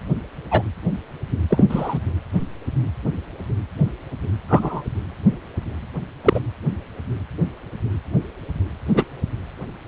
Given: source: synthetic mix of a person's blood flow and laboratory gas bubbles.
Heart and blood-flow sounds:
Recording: Doppler ultrasound of blood flow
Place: precordium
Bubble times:
0.51-0.62 s: bubbles
1.49-1.65 s: bubbles
1.69-1.98 s: bubbles
4.48-4.83 s: bubbles
6.25-6.40 s: bubbles
8.94-9.04 s: bubbles
From the record:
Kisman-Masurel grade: 123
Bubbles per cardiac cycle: 1 to 2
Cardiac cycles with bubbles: 10 to 50%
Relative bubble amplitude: loud (0.450 to 0.775)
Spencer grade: 2 (many but less than half of the cardiac periods contain bubble signals, singularly or in groups)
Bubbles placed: anywhere in the cardiac cycle

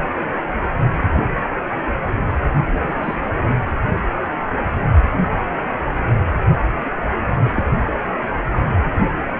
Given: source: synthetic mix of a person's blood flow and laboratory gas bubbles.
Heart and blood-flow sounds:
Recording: Doppler ultrasound of blood flow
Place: precordium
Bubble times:
2.82-3.18 s: bubbles
7.44-7.51 s: bubbles
7.55-7.63 s: bubbles
From the record:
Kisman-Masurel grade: 121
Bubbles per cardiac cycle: 1 to 2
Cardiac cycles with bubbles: 10 to 50%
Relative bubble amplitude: barely perceptible (0.100 to 0.250)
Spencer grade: 2 (many but less than half of the cardiac periods contain bubble signals, singularly or in groups)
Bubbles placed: anywhere in the cardiac cycle

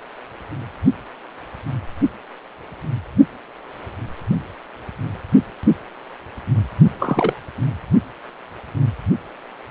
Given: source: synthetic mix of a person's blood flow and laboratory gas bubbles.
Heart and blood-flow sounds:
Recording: Doppler ultrasound of blood flow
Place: precordium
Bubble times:
7.00-7.40 s: bubbles
From the record:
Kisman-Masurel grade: 212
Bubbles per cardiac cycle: several, 3 to 8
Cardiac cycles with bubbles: 1 to 10%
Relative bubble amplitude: moderate (0.250 to 0.450)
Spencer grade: 1 (occasional bubble signal discernible with the cardiac motion signal, with majority of cardiac periods free of bubbles)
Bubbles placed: only in the low amplitude regions of the cardiac cycle

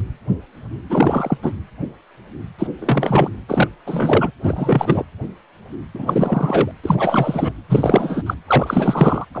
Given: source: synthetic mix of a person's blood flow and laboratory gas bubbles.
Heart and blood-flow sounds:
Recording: Doppler ultrasound of blood flow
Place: precordium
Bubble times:
0.90-1.38 s: bubbles
1.42-1.52 s: bubbles
2.58-2.67 s: bubbles
2.79-3.30 s: bubbles
3.48-3.68 s: bubbles
3.85-4.31 s: bubbles
4.44-5.04 s: bubbles
5.94-6.72 s: bubbles
6.83-7.53 s: bubbles
7.69-8.22 s: bubbles
8.26-8.34 s: bubbles
8.47-9.25 s: bubbles
9.34-9.40 s: bubbles
From the record:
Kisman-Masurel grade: 333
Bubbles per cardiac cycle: rolling drumbeat, 9 or more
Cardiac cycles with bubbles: 50 to 99%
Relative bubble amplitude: loud (0.450 to 0.775)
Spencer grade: 3 (all of the cardiac periods contain showers or single bubble signals, but not dominating or overriding the cardiac motion signals)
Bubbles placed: anywhere in the cardiac cycle

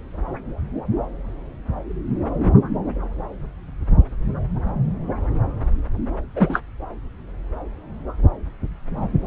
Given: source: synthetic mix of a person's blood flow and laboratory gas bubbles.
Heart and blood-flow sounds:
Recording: Doppler ultrasound of blood flow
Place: subclavian vein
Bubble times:
6.36-6.62 s: bubbles
From the record:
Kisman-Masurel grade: 123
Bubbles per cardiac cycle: 1 to 2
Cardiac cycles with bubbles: 10 to 50%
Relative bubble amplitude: loud (0.450 to 0.775)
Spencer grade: 2 (many but less than half of the cardiac periods contain bubble signals, singularly or in groups)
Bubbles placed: anywhere in the cardiac cycle

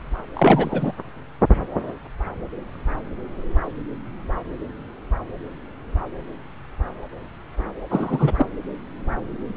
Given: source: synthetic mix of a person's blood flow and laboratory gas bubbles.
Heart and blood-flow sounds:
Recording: Doppler ultrasound of blood flow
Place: subclavian vein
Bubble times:
0.33-0.92 s: bubbles
7.90-8.46 s: bubbles
From the record:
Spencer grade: 2 (many but less than half of the cardiac periods contain bubble signals, singularly or in groups)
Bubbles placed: anywhere in the cardiac cycle

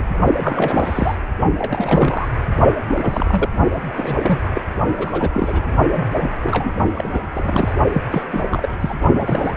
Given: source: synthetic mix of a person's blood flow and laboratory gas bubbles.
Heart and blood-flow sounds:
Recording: Doppler ultrasound of blood flow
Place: precordium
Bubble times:
0.00-0.06 s: bubbles
0.43-1.17 s: bubbles
1.58-2.28 s: bubbles
2.88-3.49 s: bubbles
3.96-4.41 s: bubbles
4.45-4.50 s: bubbles
4.54-4.62 s: bubbles
4.97-5.29 s: bubbles
5.34-5.75 s: bubbles
5.92-6.09 s: bubbles
6.21-6.36 s: bubbles
6.43-6.70 s: bubbles
6.93-7.09 s: bubbles
7.13-7.20 s: bubbles
7.33-7.74 s: bubbles
7.92-8.03 s: bubbles
8.11-8.25 s: bubbles
8.32-8.44 s: bubbles
8.51-8.69 s: bubbles
8.80-8.95 s: bubbles
9.20-9.53 s: bubbles
From the record:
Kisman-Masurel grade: 342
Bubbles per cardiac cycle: rolling drumbeat, 9 or more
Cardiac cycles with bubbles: 100%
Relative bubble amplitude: moderate (0.250 to 0.450)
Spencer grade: 3 (all of the cardiac periods contain showers or single bubble signals, but not dominating or overriding the cardiac motion signals)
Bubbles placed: only in the low amplitude regions of the cardiac cycle

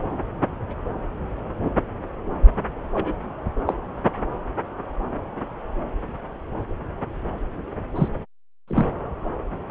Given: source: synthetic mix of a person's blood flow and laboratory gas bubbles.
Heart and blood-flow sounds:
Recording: Doppler ultrasound of blood flow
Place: subclavian vein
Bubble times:
2.94-3.14 s: bubbles
3.67-3.74 s: bubbles
7.95-8.09 s: bubbles
8.68-8.86 s: bubbles
From the record:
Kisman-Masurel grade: 122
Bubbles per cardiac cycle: 1 to 2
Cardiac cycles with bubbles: 10 to 50%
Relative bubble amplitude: moderate (0.250 to 0.450)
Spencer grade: 2 (many but less than half of the cardiac periods contain bubble signals, singularly or in groups)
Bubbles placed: anywhere in the cardiac cycle

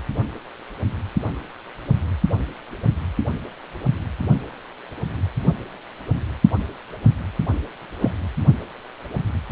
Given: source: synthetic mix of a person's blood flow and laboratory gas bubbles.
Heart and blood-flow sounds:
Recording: Doppler ultrasound of blood flow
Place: precordium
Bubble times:
8.00-8.11 s: bubbles
From the record:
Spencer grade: 1 (occasional bubble signal discernible with the cardiac motion signal, with majority of cardiac periods free of bubbles)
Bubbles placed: only in the low amplitude regions of the cardiac cycle

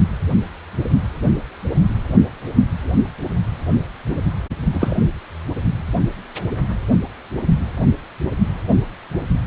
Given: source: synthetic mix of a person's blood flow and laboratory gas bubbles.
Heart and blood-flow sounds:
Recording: Doppler ultrasound of blood flow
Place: precordium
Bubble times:
4.74-5.08 s: bubbles
From the record:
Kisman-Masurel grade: 212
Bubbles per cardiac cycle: several, 3 to 8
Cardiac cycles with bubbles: 1 to 10%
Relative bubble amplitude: moderate (0.250 to 0.450)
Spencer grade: 1 (occasional bubble signal discernible with the cardiac motion signal, with majority of cardiac periods free of bubbles)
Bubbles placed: anywhere in the cardiac cycle

